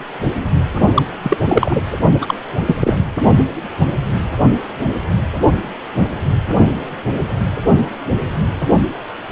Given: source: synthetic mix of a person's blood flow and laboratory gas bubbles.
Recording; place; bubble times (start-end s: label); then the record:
Doppler ultrasound of blood flow; precordium
0.95-1.03 s: bubbles
1.23-1.37 s: bubbles
1.48-1.81 s: bubbles
2.21-2.35 s: bubbles
2.66-2.75 s: bubbles
2.79-2.96 s: bubbles
From the record:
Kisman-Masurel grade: 223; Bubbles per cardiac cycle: several, 3 to 8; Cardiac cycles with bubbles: 10 to 50%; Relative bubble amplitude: loud (0.450 to 0.775); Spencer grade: 2 (many but less than half of the cardiac periods contain bubble signals, singularly or in groups); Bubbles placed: only in the low amplitude regions of the cardiac cycle